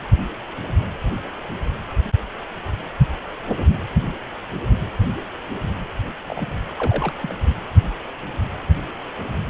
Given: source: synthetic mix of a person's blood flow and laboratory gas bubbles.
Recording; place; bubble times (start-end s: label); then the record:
Doppler ultrasound of blood flow; precordium
6.27-6.51 s: bubbles
6.79-7.13 s: bubbles
7.21-7.33 s: bubbles
From the record:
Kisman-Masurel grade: 121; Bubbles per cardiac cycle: 1 to 2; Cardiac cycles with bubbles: 10 to 50%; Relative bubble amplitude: barely perceptible (0.100 to 0.250); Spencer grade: 2 (many but less than half of the cardiac periods contain bubble signals, singularly or in groups); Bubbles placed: anywhere in the cardiac cycle